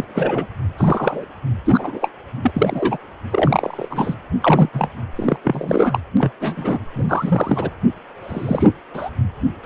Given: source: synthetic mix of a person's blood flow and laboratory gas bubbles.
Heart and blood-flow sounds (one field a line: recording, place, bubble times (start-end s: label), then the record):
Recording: Doppler ultrasound of blood flow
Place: precordium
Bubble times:
0.00-0.05 s: bubbles
0.08-0.47 s: bubbles
0.77-1.24 s: bubbles
1.65-2.10 s: bubbles
2.43-2.51 s: bubbles
2.54-2.99 s: bubbles
3.31-4.15 s: bubbles
4.40-4.69 s: bubbles
4.73-4.88 s: bubbles
5.15-5.38 s: bubbles
5.43-6.00 s: bubbles
6.17-6.32 s: bubbles
6.40-6.79 s: bubbles
6.94-7.70 s: bubbles
8.22-8.70 s: bubbles
8.94-9.10 s: bubbles
9.63-9.66 s: bubbles
From the record:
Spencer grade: 3 (all of the cardiac periods contain showers or single bubble signals, but not dominating or overriding the cardiac motion signals)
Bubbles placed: anywhere in the cardiac cycle